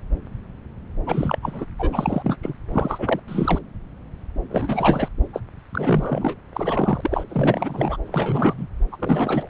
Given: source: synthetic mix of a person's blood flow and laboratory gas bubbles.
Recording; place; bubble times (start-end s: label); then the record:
Doppler ultrasound of blood flow; subclavian vein
1.06-1.38 s: bubbles
1.42-1.65 s: bubbles
1.79-2.36 s: bubbles
2.42-2.53 s: bubbles
2.72-3.19 s: bubbles
3.27-3.59 s: bubbles
4.49-5.08 s: bubbles
5.33-5.40 s: bubbles
5.74-6.34 s: bubbles
6.54-7.24 s: bubbles
7.29-7.97 s: bubbles
8.06-8.67 s: bubbles
8.92-8.96 s: bubbles
8.99-9.50 s: bubbles
From the record:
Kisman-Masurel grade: 332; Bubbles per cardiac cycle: rolling drumbeat, 9 or more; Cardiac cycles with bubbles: 50 to 99%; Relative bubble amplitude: moderate (0.250 to 0.450); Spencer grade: 3 (all of the cardiac periods contain showers or single bubble signals, but not dominating or overriding the cardiac motion signals); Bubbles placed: anywhere in the cardiac cycle